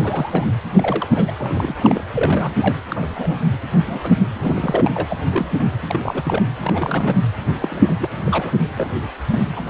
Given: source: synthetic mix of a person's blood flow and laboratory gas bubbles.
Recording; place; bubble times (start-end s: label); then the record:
Doppler ultrasound of blood flow; precordium
0.00-0.53 s: bubbles
0.72-1.31 s: bubbles
1.39-2.04 s: bubbles
2.14-2.76 s: bubbles
2.88-3.39 s: bubbles
3.85-4.00 s: bubbles
4.03-4.10 s: bubbles
4.35-4.91 s: bubbles
4.94-5.17 s: bubbles
5.30-5.47 s: bubbles
5.58-5.65 s: bubbles
5.81-6.42 s: bubbles
6.60-7.26 s: bubbles
7.61-8.10 s: bubbles
8.24-8.52 s: bubbles
8.75-8.88 s: bubbles
9.30-9.41 s: bubbles
9.56-9.61 s: bubbles
From the record:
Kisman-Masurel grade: 232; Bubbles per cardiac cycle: several, 3 to 8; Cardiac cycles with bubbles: 50 to 99%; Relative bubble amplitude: moderate (0.250 to 0.450); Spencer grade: 3 (all of the cardiac periods contain showers or single bubble signals, but not dominating or overriding the cardiac motion signals); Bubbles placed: anywhere in the cardiac cycle